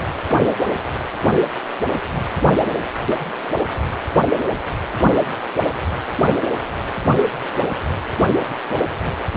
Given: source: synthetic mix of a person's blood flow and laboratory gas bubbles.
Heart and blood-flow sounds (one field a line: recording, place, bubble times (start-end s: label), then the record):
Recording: Doppler ultrasound of blood flow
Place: precordium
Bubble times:
9.19-9.24 s: bubbles
From the record:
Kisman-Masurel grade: 212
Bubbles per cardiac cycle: several, 3 to 8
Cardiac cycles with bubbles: 1 to 10%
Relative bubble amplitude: moderate (0.250 to 0.450)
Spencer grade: 1 (occasional bubble signal discernible with the cardiac motion signal, with majority of cardiac periods free of bubbles)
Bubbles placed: anywhere in the cardiac cycle